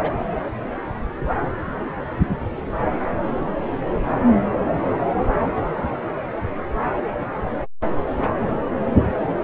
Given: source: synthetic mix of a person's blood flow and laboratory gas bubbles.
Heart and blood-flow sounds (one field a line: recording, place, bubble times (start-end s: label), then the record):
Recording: Doppler ultrasound of blood flow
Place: subclavian vein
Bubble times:
0.00-0.14 s: bubbles
From the record:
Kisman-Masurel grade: 212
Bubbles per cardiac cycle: several, 3 to 8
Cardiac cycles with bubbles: 1 to 10%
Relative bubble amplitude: moderate (0.250 to 0.450)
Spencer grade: 1 (occasional bubble signal discernible with the cardiac motion signal, with majority of cardiac periods free of bubbles)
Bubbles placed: anywhere in the cardiac cycle